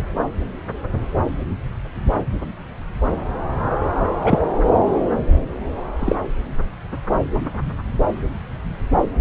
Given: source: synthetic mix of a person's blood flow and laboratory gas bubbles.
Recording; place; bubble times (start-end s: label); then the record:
Doppler ultrasound of blood flow; subclavian vein
4.24-4.45 s: bubbles
6.00-6.15 s: bubbles
From the record:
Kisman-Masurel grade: 123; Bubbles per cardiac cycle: 1 to 2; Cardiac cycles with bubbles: 10 to 50%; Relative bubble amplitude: loud (0.450 to 0.775); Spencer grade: 2 (many but less than half of the cardiac periods contain bubble signals, singularly or in groups); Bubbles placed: anywhere in the cardiac cycle